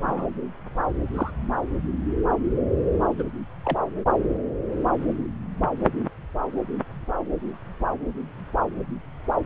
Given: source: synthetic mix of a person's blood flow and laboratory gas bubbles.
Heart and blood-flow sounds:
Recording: Doppler ultrasound of blood flow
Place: subclavian vein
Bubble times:
0.00-0.26 s: bubbles
1.14-1.31 s: bubbles
3.17-3.23 s: bubbles
3.64-3.78 s: bubbles
From the record:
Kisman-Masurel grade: 121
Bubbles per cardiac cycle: 1 to 2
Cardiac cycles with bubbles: 10 to 50%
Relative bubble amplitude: barely perceptible (0.100 to 0.250)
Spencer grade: 2 (many but less than half of the cardiac periods contain bubble signals, singularly or in groups)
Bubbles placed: anywhere in the cardiac cycle

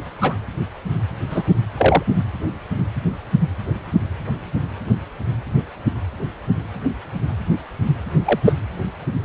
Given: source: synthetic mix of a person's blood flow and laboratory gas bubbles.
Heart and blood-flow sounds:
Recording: Doppler ultrasound of blood flow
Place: precordium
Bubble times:
0.21-0.35 s: bubbles
1.29-1.43 s: bubbles
1.77-2.03 s: bubbles
8.25-8.39 s: bubbles
8.45-8.53 s: bubbles
From the record:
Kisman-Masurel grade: 123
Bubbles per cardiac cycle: 1 to 2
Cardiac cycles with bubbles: 10 to 50%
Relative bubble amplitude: loud (0.450 to 0.775)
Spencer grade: 2 (many but less than half of the cardiac periods contain bubble signals, singularly or in groups)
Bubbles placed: anywhere in the cardiac cycle

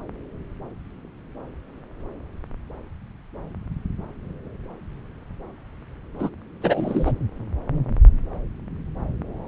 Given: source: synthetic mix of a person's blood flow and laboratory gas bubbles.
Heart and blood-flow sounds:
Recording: Doppler ultrasound of blood flow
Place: subclavian vein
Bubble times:
6.18-6.29 s: bubbles
6.61-7.12 s: bubbles
From the record:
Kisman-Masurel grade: 213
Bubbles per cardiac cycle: several, 3 to 8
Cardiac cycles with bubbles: 1 to 10%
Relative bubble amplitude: loud (0.450 to 0.775)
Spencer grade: 1 (occasional bubble signal discernible with the cardiac motion signal, with majority of cardiac periods free of bubbles)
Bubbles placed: anywhere in the cardiac cycle

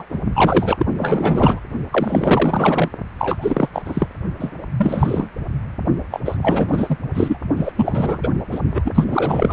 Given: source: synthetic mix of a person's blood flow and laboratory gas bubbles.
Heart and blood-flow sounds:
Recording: Doppler ultrasound of blood flow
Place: precordium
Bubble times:
0.00-0.04 s: bubbles
0.08-0.20 s: bubbles
0.35-0.85 s: bubbles
0.98-1.59 s: bubbles
1.91-2.90 s: bubbles
3.18-3.68 s: bubbles
3.73-3.82 s: bubbles
3.85-4.08 s: bubbles
4.39-4.52 s: bubbles
4.77-5.30 s: bubbles
6.11-6.20 s: bubbles
6.25-6.37 s: bubbles
6.42-6.97 s: bubbles
7.14-7.38 s: bubbles
7.56-7.72 s: bubbles
7.75-8.29 s: bubbles
8.51-8.61 s: bubbles
8.70-8.92 s: bubbles
8.95-9.53 s: bubbles
From the record:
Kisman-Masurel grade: 444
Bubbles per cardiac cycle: continuous sound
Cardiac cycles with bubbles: 100%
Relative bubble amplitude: maximal (0.775 to 0.999)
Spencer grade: 4 (maximum detectable bubble signal sounding continuously throughout systole and diastole of every cardiac period, and overriding the amplitude of the normal cardiac signals)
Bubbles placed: only in the low amplitude regions of the cardiac cycle

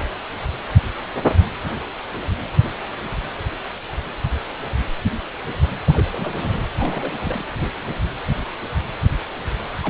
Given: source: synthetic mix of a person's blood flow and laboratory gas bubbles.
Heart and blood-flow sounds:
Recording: Doppler ultrasound of blood flow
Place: precordium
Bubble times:
5.84-6.08 s: bubbles
6.12-6.61 s: bubbles
6.79-7.12 s: bubbles
7.20-7.45 s: bubbles
9.81-9.90 s: bubbles
From the record:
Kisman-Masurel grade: 221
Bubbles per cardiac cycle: several, 3 to 8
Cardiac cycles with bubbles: 10 to 50%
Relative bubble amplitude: barely perceptible (0.100 to 0.250)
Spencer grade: 2 (many but less than half of the cardiac periods contain bubble signals, singularly or in groups)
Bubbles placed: anywhere in the cardiac cycle

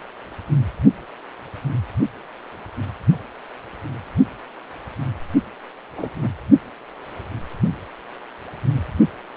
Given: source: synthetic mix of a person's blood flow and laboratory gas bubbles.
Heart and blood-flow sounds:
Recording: Doppler ultrasound of blood flow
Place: precordium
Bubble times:
5.97-6.09 s: bubbles
6.18-6.28 s: bubbles
From the record:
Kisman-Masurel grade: 211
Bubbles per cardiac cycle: several, 3 to 8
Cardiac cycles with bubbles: 1 to 10%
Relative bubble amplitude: barely perceptible (0.100 to 0.250)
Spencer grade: 1 (occasional bubble signal discernible with the cardiac motion signal, with majority of cardiac periods free of bubbles)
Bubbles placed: only in the low amplitude regions of the cardiac cycle

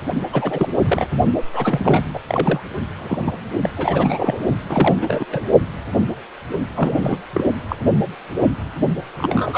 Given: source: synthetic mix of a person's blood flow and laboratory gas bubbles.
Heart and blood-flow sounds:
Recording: Doppler ultrasound of blood flow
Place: precordium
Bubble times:
0.32-0.67 s: bubbles
0.85-1.09 s: bubbles
1.52-2.04 s: bubbles
2.13-2.19 s: bubbles
2.28-2.60 s: bubbles
2.99-3.33 s: bubbles
3.62-3.70 s: bubbles
3.77-4.39 s: bubbles
4.69-5.25 s: bubbles
5.29-5.48 s: bubbles
6.75-7.18 s: bubbles
7.33-7.44 s: bubbles
7.68-7.76 s: bubbles
9.15-9.58 s: bubbles
From the record:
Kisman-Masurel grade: 332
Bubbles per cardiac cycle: rolling drumbeat, 9 or more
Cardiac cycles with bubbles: 50 to 99%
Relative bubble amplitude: moderate (0.250 to 0.450)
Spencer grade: 3 (all of the cardiac periods contain showers or single bubble signals, but not dominating or overriding the cardiac motion signals)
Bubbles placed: only in the low amplitude regions of the cardiac cycle

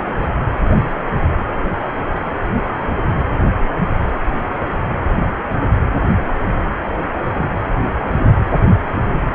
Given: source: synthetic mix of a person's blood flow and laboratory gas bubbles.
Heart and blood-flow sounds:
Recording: Doppler ultrasound of blood flow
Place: precordium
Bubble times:
0.22-0.28 s: bubbles
2.15-2.20 s: bubbles
7.35-7.49 s: bubbles
From the record:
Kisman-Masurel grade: 122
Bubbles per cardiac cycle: 1 to 2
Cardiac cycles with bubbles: 10 to 50%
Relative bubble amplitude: moderate (0.250 to 0.450)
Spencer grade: 2 (many but less than half of the cardiac periods contain bubble signals, singularly or in groups)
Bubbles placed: anywhere in the cardiac cycle

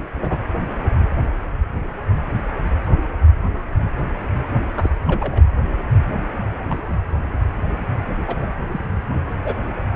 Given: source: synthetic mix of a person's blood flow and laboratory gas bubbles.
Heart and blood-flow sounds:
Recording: Doppler ultrasound of blood flow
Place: precordium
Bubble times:
0.21-0.37 s: bubbles
4.77-4.90 s: bubbles
5.08-5.43 s: bubbles
6.69-6.98 s: bubbles
8.28-8.37 s: bubbles
8.39-8.54 s: bubbles
8.72-8.86 s: bubbles
9.09-9.19 s: bubbles
9.44-9.54 s: bubbles
From the record:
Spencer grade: 2 (many but less than half of the cardiac periods contain bubble signals, singularly or in groups)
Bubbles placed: anywhere in the cardiac cycle

